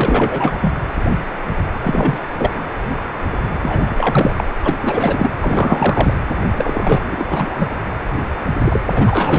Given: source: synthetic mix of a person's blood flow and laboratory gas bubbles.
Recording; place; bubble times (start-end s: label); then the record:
Doppler ultrasound of blood flow; precordium
0.00-0.58 s: bubbles
0.61-0.73 s: bubbles
1.81-2.18 s: bubbles
2.37-2.66 s: bubbles
3.61-4.34 s: bubbles
4.37-4.44 s: bubbles
4.64-4.77 s: bubbles
4.82-5.30 s: bubbles
5.41-6.19 s: bubbles
6.56-7.25 s: bubbles
7.30-7.69 s: bubbles
8.64-8.80 s: bubbles
8.91-9.39 s: bubbles
From the record:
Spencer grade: 3 (all of the cardiac periods contain showers or single bubble signals, but not dominating or overriding the cardiac motion signals); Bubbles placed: anywhere in the cardiac cycle